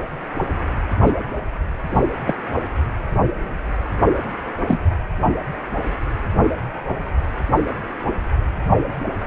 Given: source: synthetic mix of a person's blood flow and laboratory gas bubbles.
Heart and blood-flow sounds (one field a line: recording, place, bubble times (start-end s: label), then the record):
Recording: Doppler ultrasound of blood flow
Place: precordium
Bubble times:
1.05-1.12 s: bubbles
1.92-2.00 s: bubbles
2.27-2.35 s: bubbles
4.68-4.88 s: bubbles
From the record:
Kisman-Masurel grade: 122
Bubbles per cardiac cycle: 1 to 2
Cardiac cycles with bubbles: 10 to 50%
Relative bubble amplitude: moderate (0.250 to 0.450)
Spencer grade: 2 (many but less than half of the cardiac periods contain bubble signals, singularly or in groups)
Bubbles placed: anywhere in the cardiac cycle